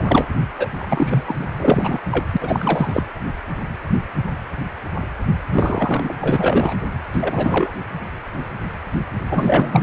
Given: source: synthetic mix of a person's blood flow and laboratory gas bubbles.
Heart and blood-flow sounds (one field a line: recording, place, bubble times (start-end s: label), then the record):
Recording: Doppler ultrasound of blood flow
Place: precordium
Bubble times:
0.00-0.28 s: bubbles
0.58-0.68 s: bubbles
0.75-1.47 s: bubbles
1.56-1.99 s: bubbles
2.11-2.25 s: bubbles
2.31-2.37 s: bubbles
2.41-3.04 s: bubbles
5.52-6.16 s: bubbles
6.21-6.74 s: bubbles
7.12-7.69 s: bubbles
9.30-9.83 s: bubbles
From the record:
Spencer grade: 3 (all of the cardiac periods contain showers or single bubble signals, but not dominating or overriding the cardiac motion signals)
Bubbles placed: anywhere in the cardiac cycle